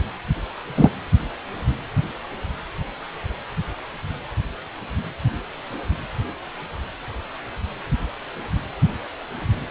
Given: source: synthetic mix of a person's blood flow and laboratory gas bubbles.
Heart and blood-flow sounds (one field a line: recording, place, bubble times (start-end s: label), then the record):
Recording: Doppler ultrasound of blood flow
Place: precordium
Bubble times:
0.77-0.89 s: bubbles
From the record:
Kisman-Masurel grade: 113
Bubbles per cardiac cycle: 1 to 2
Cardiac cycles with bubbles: 1 to 10%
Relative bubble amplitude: loud (0.450 to 0.775)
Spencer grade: 1 (occasional bubble signal discernible with the cardiac motion signal, with majority of cardiac periods free of bubbles)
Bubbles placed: anywhere in the cardiac cycle